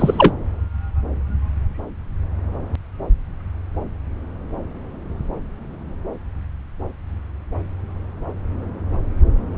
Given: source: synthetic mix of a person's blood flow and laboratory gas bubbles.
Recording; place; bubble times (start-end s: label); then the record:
Doppler ultrasound of blood flow; subclavian vein
0.00-0.33 s: bubbles
From the record:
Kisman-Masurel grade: 213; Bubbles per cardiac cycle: several, 3 to 8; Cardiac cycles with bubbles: 1 to 10%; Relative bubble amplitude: loud (0.450 to 0.775); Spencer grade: 1 (occasional bubble signal discernible with the cardiac motion signal, with majority of cardiac periods free of bubbles); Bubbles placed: anywhere in the cardiac cycle